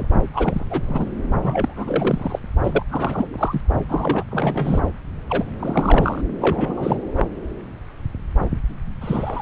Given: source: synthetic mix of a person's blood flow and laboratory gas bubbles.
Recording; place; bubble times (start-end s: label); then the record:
Doppler ultrasound of blood flow; subclavian vein
0.00-0.05 s: bubbles
0.33-0.66 s: bubbles
0.70-1.11 s: bubbles
1.42-2.39 s: bubbles
2.64-2.83 s: bubbles
2.89-3.62 s: bubbles
3.89-4.24 s: bubbles
4.30-4.80 s: bubbles
5.29-5.46 s: bubbles
5.59-6.21 s: bubbles
6.40-7.04 s: bubbles
7.17-7.25 s: bubbles
9.01-9.42 s: bubbles
From the record:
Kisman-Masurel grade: 332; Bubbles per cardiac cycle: rolling drumbeat, 9 or more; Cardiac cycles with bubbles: 50 to 99%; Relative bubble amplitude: moderate (0.250 to 0.450); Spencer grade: 3 (all of the cardiac periods contain showers or single bubble signals, but not dominating or overriding the cardiac motion signals); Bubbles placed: anywhere in the cardiac cycle